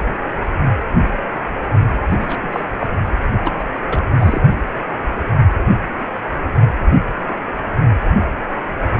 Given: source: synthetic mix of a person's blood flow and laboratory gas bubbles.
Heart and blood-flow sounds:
Doppler ultrasound of blood flow; precordium
2.10-2.37 s: bubbles
2.43-2.48 s: bubbles
2.52-2.62 s: bubbles
2.77-2.87 s: bubbles
3.44-3.52 s: bubbles
3.58-3.63 s: bubbles
3.89-4.02 s: bubbles
4.17-4.40 s: bubbles
From the record:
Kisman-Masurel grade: 222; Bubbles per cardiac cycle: several, 3 to 8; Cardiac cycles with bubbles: 10 to 50%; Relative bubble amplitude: moderate (0.250 to 0.450); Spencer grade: 2 (many but less than half of the cardiac periods contain bubble signals, singularly or in groups); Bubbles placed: only in the low amplitude regions of the cardiac cycle

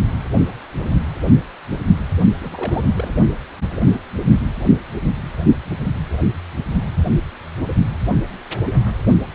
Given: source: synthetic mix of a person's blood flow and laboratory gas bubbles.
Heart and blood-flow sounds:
Doppler ultrasound of blood flow; precordium
2.40-2.82 s: bubbles
2.94-3.12 s: bubbles
From the record:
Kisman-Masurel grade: 211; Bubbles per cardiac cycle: several, 3 to 8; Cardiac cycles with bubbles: 1 to 10%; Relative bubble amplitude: barely perceptible (0.100 to 0.250); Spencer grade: 1 (occasional bubble signal discernible with the cardiac motion signal, with majority of cardiac periods free of bubbles); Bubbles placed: only in the low amplitude regions of the cardiac cycle

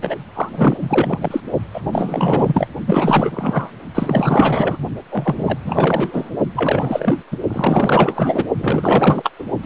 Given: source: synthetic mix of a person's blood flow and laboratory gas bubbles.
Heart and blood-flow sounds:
Doppler ultrasound of blood flow; precordium
0.00-0.16 s: bubbles
0.34-0.77 s: bubbles
0.80-1.41 s: bubbles
1.73-1.81 s: bubbles
1.92-2.67 s: bubbles
2.87-3.70 s: bubbles
3.94-4.77 s: bubbles
5.08-5.58 s: bubbles
5.61-6.30 s: bubbles
6.55-7.21 s: bubbles
7.31-7.37 s: bubbles
7.48-8.45 s: bubbles
8.58-9.30 s: bubbles
9.38-9.45 s: bubbles
9.63-9.66 s: bubbles
From the record:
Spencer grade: 4 (maximum detectable bubble signal sounding continuously throughout systole and diastole of every cardiac period, and overriding the amplitude of the normal cardiac signals); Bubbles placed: only in the low amplitude regions of the cardiac cycle

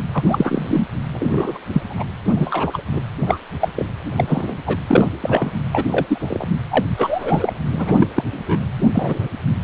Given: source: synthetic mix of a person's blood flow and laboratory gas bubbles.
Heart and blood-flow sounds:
Doppler ultrasound of blood flow; precordium
0.12-0.24 s: bubbles
0.27-0.90 s: bubbles
1.11-1.58 s: bubbles
1.72-1.82 s: bubbles
1.89-2.04 s: bubbles
2.36-2.81 s: bubbles
2.93-3.01 s: bubbles
3.26-3.38 s: bubbles
3.60-3.69 s: bubbles
3.76-3.85 s: bubbles
4.16-4.58 s: bubbles
4.66-4.79 s: bubbles
4.87-5.08 s: bubbles
5.21-5.52 s: bubbles
5.72-5.84 s: bubbles
5.92-6.46 s: bubbles
6.70-6.85 s: bubbles
6.97-7.53 s: bubbles
7.71-8.07 s: bubbles
8.14-8.24 s: bubbles
8.30-8.60 s: bubbles
8.95-9.28 s: bubbles
9.62-9.64 s: bubbles
From the record:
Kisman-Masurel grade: 243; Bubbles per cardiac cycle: several, 3 to 8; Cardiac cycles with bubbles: 100%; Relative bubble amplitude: loud (0.450 to 0.775); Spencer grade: 3 (all of the cardiac periods contain showers or single bubble signals, but not dominating or overriding the cardiac motion signals); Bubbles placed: anywhere in the cardiac cycle

